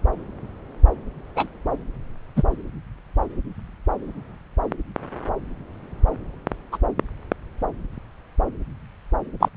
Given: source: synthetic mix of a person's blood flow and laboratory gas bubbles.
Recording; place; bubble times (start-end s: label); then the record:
Doppler ultrasound of blood flow; subclavian vein
1.35-1.47 s: bubbles
2.36-2.43 s: bubbles
6.71-6.78 s: bubbles
9.40-9.49 s: bubbles
From the record:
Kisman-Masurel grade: 123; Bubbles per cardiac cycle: 1 to 2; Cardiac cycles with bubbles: 10 to 50%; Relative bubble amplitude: loud (0.450 to 0.775); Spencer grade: 2 (many but less than half of the cardiac periods contain bubble signals, singularly or in groups); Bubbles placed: anywhere in the cardiac cycle